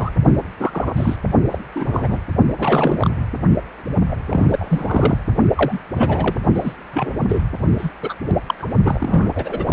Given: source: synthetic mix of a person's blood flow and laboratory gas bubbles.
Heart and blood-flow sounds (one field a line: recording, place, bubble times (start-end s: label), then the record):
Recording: Doppler ultrasound of blood flow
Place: precordium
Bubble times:
0.00-0.10 s: bubbles
0.59-0.93 s: bubbles
0.96-1.16 s: bubbles
1.49-1.58 s: bubbles
1.75-2.19 s: bubbles
2.58-3.10 s: bubbles
4.07-4.17 s: bubbles
4.28-5.17 s: bubbles
5.55-5.79 s: bubbles
5.95-6.39 s: bubbles
6.54-6.74 s: bubbles
6.92-7.12 s: bubbles
7.29-7.42 s: bubbles
7.78-7.91 s: bubbles
8.02-8.15 s: bubbles
8.47-8.55 s: bubbles
8.59-8.68 s: bubbles
8.84-9.31 s: bubbles
9.35-9.73 s: bubbles
From the record:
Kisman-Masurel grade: 242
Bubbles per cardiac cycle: several, 3 to 8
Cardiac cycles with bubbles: 100%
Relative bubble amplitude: moderate (0.250 to 0.450)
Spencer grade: 3 (all of the cardiac periods contain showers or single bubble signals, but not dominating or overriding the cardiac motion signals)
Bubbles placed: only in the low amplitude regions of the cardiac cycle